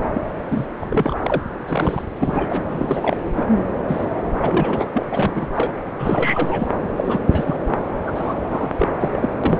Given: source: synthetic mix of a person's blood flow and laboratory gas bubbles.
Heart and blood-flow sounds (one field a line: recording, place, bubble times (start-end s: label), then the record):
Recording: Doppler ultrasound of blood flow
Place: subclavian vein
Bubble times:
0.14-0.22 s: bubbles
0.49-0.69 s: bubbles
0.80-1.15 s: bubbles
1.22-1.42 s: bubbles
1.67-2.03 s: bubbles
2.17-2.63 s: bubbles
2.72-3.17 s: bubbles
3.37-3.46 s: bubbles
3.52-3.61 s: bubbles
3.88-4.06 s: bubbles
4.38-4.87 s: bubbles
4.93-5.72 s: bubbles
5.99-6.67 s: bubbles
6.97-7.57 s: bubbles
8.07-8.34 s: bubbles
8.50-8.88 s: bubbles
9.00-9.09 s: bubbles
9.13-9.29 s: bubbles
9.44-9.60 s: bubbles
From the record:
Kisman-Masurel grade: 342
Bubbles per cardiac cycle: rolling drumbeat, 9 or more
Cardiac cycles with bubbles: 100%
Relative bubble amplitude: moderate (0.250 to 0.450)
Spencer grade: 3 (all of the cardiac periods contain showers or single bubble signals, but not dominating or overriding the cardiac motion signals)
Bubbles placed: anywhere in the cardiac cycle